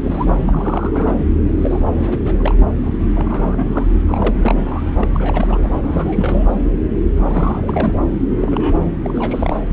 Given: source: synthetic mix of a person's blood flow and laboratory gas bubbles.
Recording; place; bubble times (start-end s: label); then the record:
Doppler ultrasound of blood flow; subclavian vein
0.00-0.36 s: bubbles
0.40-1.16 s: bubbles
1.58-1.83 s: bubbles
1.99-2.18 s: bubbles
2.25-2.67 s: bubbles
2.83-2.94 s: bubbles
2.99-3.04 s: bubbles
3.15-3.87 s: bubbles
4.07-4.92 s: bubbles
4.96-5.07 s: bubbles
5.13-5.70 s: bubbles
5.83-6.50 s: bubbles
7.15-7.99 s: bubbles
8.38-8.85 s: bubbles
9.04-9.60 s: bubbles
From the record:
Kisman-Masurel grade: 342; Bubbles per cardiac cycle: rolling drumbeat, 9 or more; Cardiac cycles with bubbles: 100%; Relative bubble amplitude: moderate (0.250 to 0.450); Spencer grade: 3 (all of the cardiac periods contain showers or single bubble signals, but not dominating or overriding the cardiac motion signals); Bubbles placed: anywhere in the cardiac cycle